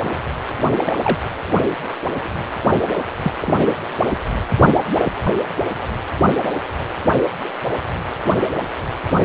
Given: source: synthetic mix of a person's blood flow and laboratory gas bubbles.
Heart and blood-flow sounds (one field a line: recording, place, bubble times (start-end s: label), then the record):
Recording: Doppler ultrasound of blood flow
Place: precordium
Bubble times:
0.77-0.92 s: bubbles
1.03-1.18 s: bubbles
3.21-3.32 s: bubbles
3.41-3.64 s: bubbles
From the record:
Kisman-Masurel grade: 122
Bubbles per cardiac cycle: 1 to 2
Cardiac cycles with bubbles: 10 to 50%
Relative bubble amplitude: moderate (0.250 to 0.450)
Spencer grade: 2 (many but less than half of the cardiac periods contain bubble signals, singularly or in groups)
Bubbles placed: only in the low amplitude regions of the cardiac cycle